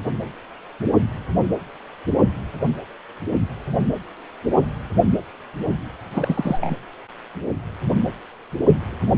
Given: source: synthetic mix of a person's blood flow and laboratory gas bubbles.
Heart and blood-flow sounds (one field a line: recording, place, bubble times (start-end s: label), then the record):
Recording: Doppler ultrasound of blood flow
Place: precordium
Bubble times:
6.11-6.59 s: bubbles
6.62-6.77 s: bubbles
From the record:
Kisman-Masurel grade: 212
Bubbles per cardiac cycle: several, 3 to 8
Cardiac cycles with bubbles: 1 to 10%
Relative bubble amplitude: moderate (0.250 to 0.450)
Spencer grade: 1 (occasional bubble signal discernible with the cardiac motion signal, with majority of cardiac periods free of bubbles)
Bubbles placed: anywhere in the cardiac cycle